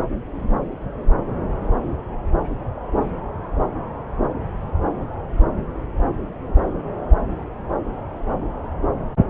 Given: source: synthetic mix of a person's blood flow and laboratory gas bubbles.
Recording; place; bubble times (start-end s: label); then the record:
Doppler ultrasound of blood flow; subclavian vein
no bubbles
From the record:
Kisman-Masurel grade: 000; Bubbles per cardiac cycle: 0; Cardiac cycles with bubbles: 0%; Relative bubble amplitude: no bubbles discernible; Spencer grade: 0 (complete lack of bubble signals)